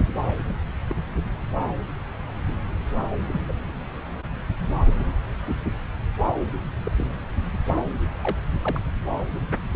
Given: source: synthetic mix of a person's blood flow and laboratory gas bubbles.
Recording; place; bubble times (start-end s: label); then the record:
Doppler ultrasound of blood flow; subclavian vein
0.48-0.54 s: bubbles
0.89-0.94 s: bubbles
3.27-3.40 s: bubbles
3.48-3.52 s: bubbles
6.84-6.92 s: bubbles
6.97-7.04 s: bubbles
8.22-8.37 s: bubbles
8.62-8.79 s: bubbles
From the record:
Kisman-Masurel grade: 121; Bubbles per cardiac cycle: 1 to 2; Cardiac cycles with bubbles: 10 to 50%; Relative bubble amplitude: barely perceptible (0.100 to 0.250); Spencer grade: 2 (many but less than half of the cardiac periods contain bubble signals, singularly or in groups); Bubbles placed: anywhere in the cardiac cycle